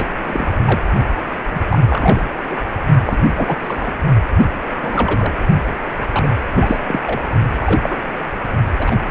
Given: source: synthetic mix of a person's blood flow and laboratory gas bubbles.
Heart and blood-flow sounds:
Doppler ultrasound of blood flow; precordium
0.00-0.08 s: bubbles
0.26-0.47 s: bubbles
0.65-0.81 s: bubbles
1.51-1.61 s: bubbles
1.69-1.79 s: bubbles
1.81-2.25 s: bubbles
2.50-2.56 s: bubbles
3.05-3.18 s: bubbles
3.37-3.56 s: bubbles
3.60-3.93 s: bubbles
4.38-4.47 s: bubbles
4.74-5.46 s: bubbles
6.12-6.29 s: bubbles
6.55-6.77 s: bubbles
6.88-7.00 s: bubbles
7.02-7.19 s: bubbles
7.59-8.10 s: bubbles
8.79-8.96 s: bubbles
From the record:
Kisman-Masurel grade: 232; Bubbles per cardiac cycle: several, 3 to 8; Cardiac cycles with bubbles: 50 to 99%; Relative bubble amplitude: moderate (0.250 to 0.450); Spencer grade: 3 (all of the cardiac periods contain showers or single bubble signals, but not dominating or overriding the cardiac motion signals); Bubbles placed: only in the low amplitude regions of the cardiac cycle

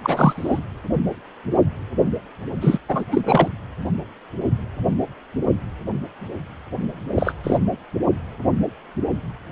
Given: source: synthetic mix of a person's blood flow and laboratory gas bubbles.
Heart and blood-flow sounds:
Doppler ultrasound of blood flow; precordium
0.03-0.59 s: bubbles
2.61-2.78 s: bubbles
2.88-3.04 s: bubbles
3.11-3.21 s: bubbles
3.25-3.48 s: bubbles
7.15-7.33 s: bubbles
7.43-7.59 s: bubbles
From the record:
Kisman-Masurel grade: 223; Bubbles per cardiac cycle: several, 3 to 8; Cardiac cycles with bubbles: 10 to 50%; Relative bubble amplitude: loud (0.450 to 0.775); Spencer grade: 2 (many but less than half of the cardiac periods contain bubble signals, singularly or in groups); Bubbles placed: anywhere in the cardiac cycle

